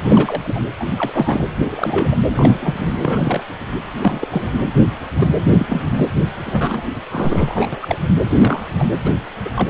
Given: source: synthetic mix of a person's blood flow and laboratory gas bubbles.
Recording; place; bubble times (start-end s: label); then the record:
Doppler ultrasound of blood flow; precordium
0.02-0.60 s: bubbles
0.80-0.85 s: bubbles
0.96-1.10 s: bubbles
1.14-1.44 s: bubbles
1.69-2.17 s: bubbles
2.33-2.94 s: bubbles
3.04-3.44 s: bubbles
4.00-4.28 s: bubbles
4.31-4.50 s: bubbles
4.79-4.83 s: bubbles
5.17-5.31 s: bubbles
5.58-5.67 s: bubbles
5.70-6.08 s: bubbles
6.46-6.81 s: bubbles
7.12-7.97 s: bubbles
8.25-8.66 s: bubbles
8.79-8.85 s: bubbles
9.04-9.15 s: bubbles
9.45-9.50 s: bubbles
9.55-9.69 s: bubbles
From the record:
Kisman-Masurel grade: 242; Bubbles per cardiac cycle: several, 3 to 8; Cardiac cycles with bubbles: 100%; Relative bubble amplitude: moderate (0.250 to 0.450); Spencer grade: 3 (all of the cardiac periods contain showers or single bubble signals, but not dominating or overriding the cardiac motion signals); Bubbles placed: anywhere in the cardiac cycle